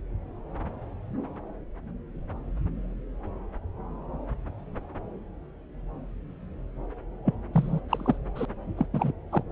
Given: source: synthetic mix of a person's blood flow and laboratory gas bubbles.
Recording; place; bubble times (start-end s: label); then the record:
Doppler ultrasound of blood flow; subclavian vein
7.25-7.34 s: bubbles
7.53-7.80 s: bubbles
7.89-8.17 s: bubbles
8.36-8.46 s: bubbles
8.77-8.86 s: bubbles
8.94-9.12 s: bubbles
9.32-9.43 s: bubbles
From the record:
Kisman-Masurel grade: 221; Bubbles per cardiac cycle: several, 3 to 8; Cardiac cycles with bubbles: 10 to 50%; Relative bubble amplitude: barely perceptible (0.100 to 0.250); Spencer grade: 2 (many but less than half of the cardiac periods contain bubble signals, singularly or in groups); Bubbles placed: anywhere in the cardiac cycle